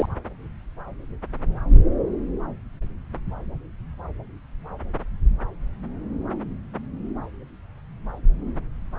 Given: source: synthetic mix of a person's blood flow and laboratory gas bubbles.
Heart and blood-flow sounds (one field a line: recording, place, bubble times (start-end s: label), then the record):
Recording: Doppler ultrasound of blood flow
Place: subclavian vein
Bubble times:
0.00-0.06 s: bubbles
From the record:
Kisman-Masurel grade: 113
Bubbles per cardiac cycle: 1 to 2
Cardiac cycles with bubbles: 1 to 10%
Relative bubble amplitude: loud (0.450 to 0.775)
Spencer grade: 1 (occasional bubble signal discernible with the cardiac motion signal, with majority of cardiac periods free of bubbles)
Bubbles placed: anywhere in the cardiac cycle